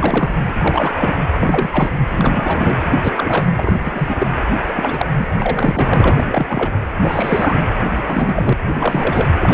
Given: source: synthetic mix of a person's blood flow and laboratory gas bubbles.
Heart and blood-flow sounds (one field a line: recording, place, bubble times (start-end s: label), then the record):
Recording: Doppler ultrasound of blood flow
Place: precordium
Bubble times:
0.00-0.30 s: bubbles
0.58-0.95 s: bubbles
0.98-1.16 s: bubbles
1.40-1.90 s: bubbles
2.10-2.76 s: bubbles
2.80-3.48 s: bubbles
3.57-3.75 s: bubbles
3.85-4.27 s: bubbles
4.68-5.06 s: bubbles
5.18-5.27 s: bubbles
5.40-6.79 s: bubbles
7.00-7.58 s: bubbles
7.97-8.54 s: bubbles
8.79-9.28 s: bubbles
9.40-9.54 s: bubbles
From the record:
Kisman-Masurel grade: 342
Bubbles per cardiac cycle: rolling drumbeat, 9 or more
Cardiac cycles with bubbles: 100%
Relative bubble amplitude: moderate (0.250 to 0.450)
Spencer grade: 3 (all of the cardiac periods contain showers or single bubble signals, but not dominating or overriding the cardiac motion signals)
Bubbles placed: anywhere in the cardiac cycle